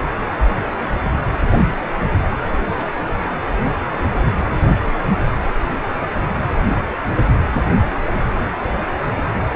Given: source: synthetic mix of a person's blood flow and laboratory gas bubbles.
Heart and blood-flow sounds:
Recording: Doppler ultrasound of blood flow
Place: precordium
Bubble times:
2.75-2.92 s: bubbles
From the record:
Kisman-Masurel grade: 111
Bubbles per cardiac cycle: 1 to 2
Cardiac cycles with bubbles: 1 to 10%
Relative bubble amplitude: barely perceptible (0.100 to 0.250)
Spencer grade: 1 (occasional bubble signal discernible with the cardiac motion signal, with majority of cardiac periods free of bubbles)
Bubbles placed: anywhere in the cardiac cycle

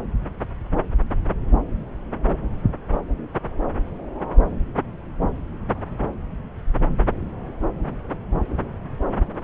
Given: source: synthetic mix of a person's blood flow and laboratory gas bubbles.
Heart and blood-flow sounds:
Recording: Doppler ultrasound of blood flow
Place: subclavian vein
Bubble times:
7.21-7.29 s: bubbles
From the record:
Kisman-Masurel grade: 111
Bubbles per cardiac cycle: 1 to 2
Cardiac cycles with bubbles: 1 to 10%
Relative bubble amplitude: barely perceptible (0.100 to 0.250)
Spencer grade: 1 (occasional bubble signal discernible with the cardiac motion signal, with majority of cardiac periods free of bubbles)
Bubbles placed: anywhere in the cardiac cycle

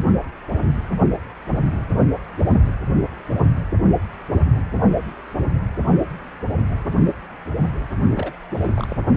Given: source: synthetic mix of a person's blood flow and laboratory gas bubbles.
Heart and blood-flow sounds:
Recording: Doppler ultrasound of blood flow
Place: precordium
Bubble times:
8.14-8.32 s: bubbles
8.52-8.97 s: bubbles
From the record:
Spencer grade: 1 (occasional bubble signal discernible with the cardiac motion signal, with majority of cardiac periods free of bubbles)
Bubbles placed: only in the low amplitude regions of the cardiac cycle

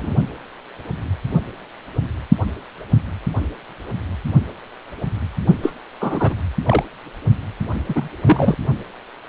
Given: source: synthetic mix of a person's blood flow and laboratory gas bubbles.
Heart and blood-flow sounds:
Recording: Doppler ultrasound of blood flow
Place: precordium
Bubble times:
0.00-0.14 s: bubbles
5.62-5.73 s: bubbles
6.00-6.34 s: bubbles
6.66-6.83 s: bubbles
7.89-8.08 s: bubbles
8.25-8.55 s: bubbles
From the record:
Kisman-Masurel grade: 223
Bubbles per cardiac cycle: several, 3 to 8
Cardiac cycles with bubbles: 10 to 50%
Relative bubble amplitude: loud (0.450 to 0.775)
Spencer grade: 2 (many but less than half of the cardiac periods contain bubble signals, singularly or in groups)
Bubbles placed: only in the low amplitude regions of the cardiac cycle

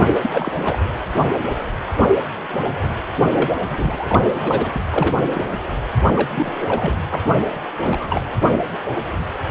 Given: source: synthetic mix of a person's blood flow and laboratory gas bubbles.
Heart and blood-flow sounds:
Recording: Doppler ultrasound of blood flow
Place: precordium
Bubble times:
0.00-0.03 s: bubbles
0.22-0.52 s: bubbles
0.65-0.79 s: bubbles
3.24-3.57 s: bubbles
3.69-4.71 s: bubbles
4.76-4.81 s: bubbles
4.90-5.43 s: bubbles
6.16-6.96 s: bubbles
7.09-7.23 s: bubbles
7.36-7.46 s: bubbles
7.80-8.21 s: bubbles
From the record:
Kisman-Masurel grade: 232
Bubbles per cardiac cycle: several, 3 to 8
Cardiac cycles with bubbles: 50 to 99%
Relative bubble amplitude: moderate (0.250 to 0.450)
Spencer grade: 3 (all of the cardiac periods contain showers or single bubble signals, but not dominating or overriding the cardiac motion signals)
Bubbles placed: anywhere in the cardiac cycle

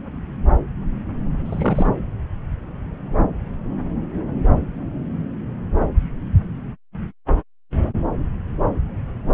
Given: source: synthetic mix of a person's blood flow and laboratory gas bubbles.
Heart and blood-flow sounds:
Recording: Doppler ultrasound of blood flow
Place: subclavian vein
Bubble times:
1.45-1.87 s: bubbles
From the record:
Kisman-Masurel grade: 212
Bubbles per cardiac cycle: several, 3 to 8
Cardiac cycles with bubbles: 1 to 10%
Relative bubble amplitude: moderate (0.250 to 0.450)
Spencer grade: 1 (occasional bubble signal discernible with the cardiac motion signal, with majority of cardiac periods free of bubbles)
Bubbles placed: anywhere in the cardiac cycle

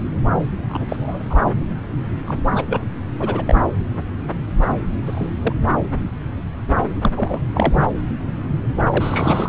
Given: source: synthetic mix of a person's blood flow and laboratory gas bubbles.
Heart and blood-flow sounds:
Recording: Doppler ultrasound of blood flow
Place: subclavian vein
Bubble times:
0.68-1.35 s: bubbles
2.25-2.35 s: bubbles
2.56-2.65 s: bubbles
2.68-2.82 s: bubbles
3.19-3.43 s: bubbles
3.48-3.54 s: bubbles
4.62-4.67 s: bubbles
5.05-5.35 s: bubbles
5.42-5.52 s: bubbles
7.01-7.11 s: bubbles
7.14-7.40 s: bubbles
7.53-7.88 s: bubbles
8.90-9.49 s: bubbles
From the record:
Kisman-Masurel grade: 222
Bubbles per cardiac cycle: several, 3 to 8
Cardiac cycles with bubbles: 10 to 50%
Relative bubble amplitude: moderate (0.250 to 0.450)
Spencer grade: 2 (many but less than half of the cardiac periods contain bubble signals, singularly or in groups)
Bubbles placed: anywhere in the cardiac cycle

